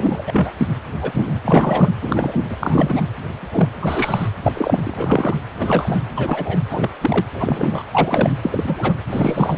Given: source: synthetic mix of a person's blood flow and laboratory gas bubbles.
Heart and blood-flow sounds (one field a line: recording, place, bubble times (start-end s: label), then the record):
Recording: Doppler ultrasound of blood flow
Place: precordium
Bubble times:
0.00-0.52 s: bubbles
0.57-0.66 s: bubbles
1.01-1.39 s: bubbles
1.45-1.89 s: bubbles
2.01-2.42 s: bubbles
2.48-2.56 s: bubbles
2.60-3.02 s: bubbles
3.40-3.70 s: bubbles
3.81-4.28 s: bubbles
4.43-5.36 s: bubbles
5.58-6.00 s: bubbles
6.15-6.60 s: bubbles
6.71-6.90 s: bubbles
7.01-7.25 s: bubbles
7.33-7.83 s: bubbles
7.92-8.38 s: bubbles
8.42-8.94 s: bubbles
9.07-9.58 s: bubbles
From the record:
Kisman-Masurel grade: 243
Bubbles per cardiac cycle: several, 3 to 8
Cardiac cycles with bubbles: 100%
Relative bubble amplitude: loud (0.450 to 0.775)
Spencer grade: 3 (all of the cardiac periods contain showers or single bubble signals, but not dominating or overriding the cardiac motion signals)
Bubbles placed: anywhere in the cardiac cycle